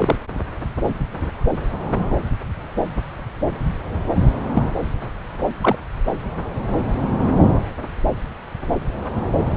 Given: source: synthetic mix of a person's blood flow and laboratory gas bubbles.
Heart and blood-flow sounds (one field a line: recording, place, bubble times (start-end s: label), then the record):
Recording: Doppler ultrasound of blood flow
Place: subclavian vein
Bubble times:
0.00-0.15 s: bubbles
4.54-4.62 s: bubbles
5.61-5.75 s: bubbles
From the record:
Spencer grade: 2 (many but less than half of the cardiac periods contain bubble signals, singularly or in groups)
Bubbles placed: anywhere in the cardiac cycle